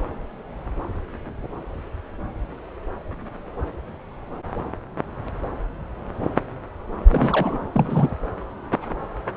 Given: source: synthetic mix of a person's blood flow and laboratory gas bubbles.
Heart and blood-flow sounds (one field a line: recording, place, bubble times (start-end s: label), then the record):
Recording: Doppler ultrasound of blood flow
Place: subclavian vein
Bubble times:
7.07-7.69 s: bubbles
7.72-8.10 s: bubbles
From the record:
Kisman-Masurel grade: 222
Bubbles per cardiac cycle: several, 3 to 8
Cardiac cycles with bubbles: 10 to 50%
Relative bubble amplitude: moderate (0.250 to 0.450)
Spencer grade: 2 (many but less than half of the cardiac periods contain bubble signals, singularly or in groups)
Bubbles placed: anywhere in the cardiac cycle